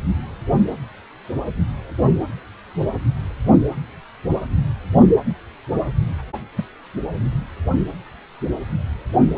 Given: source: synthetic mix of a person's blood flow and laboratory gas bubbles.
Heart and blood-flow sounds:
Doppler ultrasound of blood flow; precordium
6.56-6.63 s: bubbles
From the record:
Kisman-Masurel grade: 112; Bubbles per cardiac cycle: 1 to 2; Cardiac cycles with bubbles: 1 to 10%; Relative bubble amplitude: moderate (0.250 to 0.450); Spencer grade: 1 (occasional bubble signal discernible with the cardiac motion signal, with majority of cardiac periods free of bubbles); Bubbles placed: anywhere in the cardiac cycle

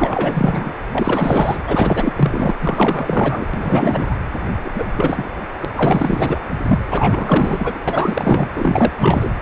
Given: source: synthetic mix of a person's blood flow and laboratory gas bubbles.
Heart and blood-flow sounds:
Doppler ultrasound of blood flow; precordium
0.00-0.72 s: bubbles
0.92-1.60 s: bubbles
1.67-2.12 s: bubbles
2.16-2.55 s: bubbles
2.62-3.46 s: bubbles
3.54-4.17 s: bubbles
4.62-4.92 s: bubbles
4.96-5.31 s: bubbles
5.61-5.65 s: bubbles
5.76-6.40 s: bubbles
6.67-6.79 s: bubbles
6.87-7.78 s: bubbles
7.87-8.50 s: bubbles
8.54-8.92 s: bubbles
8.97-9.31 s: bubbles
From the record:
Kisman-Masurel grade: 444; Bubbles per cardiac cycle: continuous sound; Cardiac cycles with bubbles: 100%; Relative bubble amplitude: maximal (0.775 to 0.999); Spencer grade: 4 (maximum detectable bubble signal sounding continuously throughout systole and diastole of every cardiac period, and overriding the amplitude of the normal cardiac signals); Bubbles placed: anywhere in the cardiac cycle

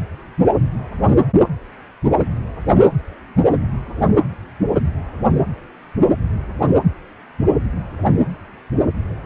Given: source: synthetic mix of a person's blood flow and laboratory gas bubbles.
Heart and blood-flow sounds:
Doppler ultrasound of blood flow; precordium
no bubbles
From the record:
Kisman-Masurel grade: 000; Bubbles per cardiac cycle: 0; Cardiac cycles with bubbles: 0%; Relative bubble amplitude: no bubbles discernible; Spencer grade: 0 (complete lack of bubble signals)

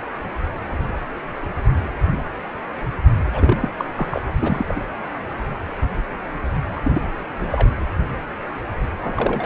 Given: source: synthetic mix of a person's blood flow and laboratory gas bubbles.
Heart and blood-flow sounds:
Doppler ultrasound of blood flow; precordium
3.33-3.69 s: bubbles
3.77-3.85 s: bubbles
3.96-4.21 s: bubbles
4.41-4.66 s: bubbles
4.68-4.80 s: bubbles
6.75-7.02 s: bubbles
7.41-7.47 s: bubbles
7.50-7.70 s: bubbles
9.01-9.46 s: bubbles
From the record:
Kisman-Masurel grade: 221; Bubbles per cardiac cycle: several, 3 to 8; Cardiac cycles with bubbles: 10 to 50%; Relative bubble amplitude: barely perceptible (0.100 to 0.250); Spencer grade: 2 (many but less than half of the cardiac periods contain bubble signals, singularly or in groups); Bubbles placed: anywhere in the cardiac cycle

